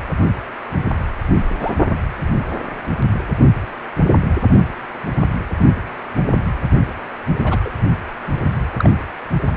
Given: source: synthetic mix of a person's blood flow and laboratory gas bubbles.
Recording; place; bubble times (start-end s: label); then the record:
Doppler ultrasound of blood flow; precordium
1.32-1.42 s: bubbles
1.59-1.72 s: bubbles
7.44-7.58 s: bubbles
7.65-7.71 s: bubbles
8.77-8.90 s: bubbles
From the record:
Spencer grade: 2 (many but less than half of the cardiac periods contain bubble signals, singularly or in groups); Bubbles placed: anywhere in the cardiac cycle